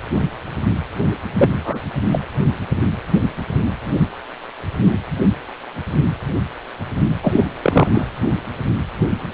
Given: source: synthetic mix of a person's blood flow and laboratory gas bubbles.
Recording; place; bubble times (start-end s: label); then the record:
Doppler ultrasound of blood flow; precordium
1.35-1.49 s: bubbles
1.53-1.79 s: bubbles
2.11-2.21 s: bubbles
7.22-7.49 s: bubbles
7.62-7.88 s: bubbles
7.93-8.07 s: bubbles
From the record:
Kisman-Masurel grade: 223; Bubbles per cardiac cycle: several, 3 to 8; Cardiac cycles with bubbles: 10 to 50%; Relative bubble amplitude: loud (0.450 to 0.775); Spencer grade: 2 (many but less than half of the cardiac periods contain bubble signals, singularly or in groups); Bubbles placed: anywhere in the cardiac cycle